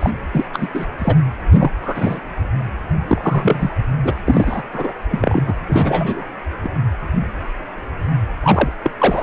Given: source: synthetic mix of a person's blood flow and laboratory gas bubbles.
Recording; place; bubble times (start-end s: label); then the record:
Doppler ultrasound of blood flow; precordium
0.00-0.10 s: bubbles
0.32-0.45 s: bubbles
0.53-0.67 s: bubbles
0.73-0.86 s: bubbles
0.98-1.15 s: bubbles
1.55-1.70 s: bubbles
1.82-2.20 s: bubbles
3.08-3.75 s: bubbles
4.04-4.14 s: bubbles
4.25-4.62 s: bubbles
4.73-4.94 s: bubbles
5.11-5.41 s: bubbles
5.46-5.54 s: bubbles
5.67-6.24 s: bubbles
6.62-6.70 s: bubbles
8.43-8.71 s: bubbles
8.84-8.90 s: bubbles
8.98-9.23 s: bubbles
From the record:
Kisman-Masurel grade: 233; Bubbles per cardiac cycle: several, 3 to 8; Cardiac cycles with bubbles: 50 to 99%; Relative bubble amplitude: loud (0.450 to 0.775); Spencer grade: 3 (all of the cardiac periods contain showers or single bubble signals, but not dominating or overriding the cardiac motion signals); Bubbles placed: anywhere in the cardiac cycle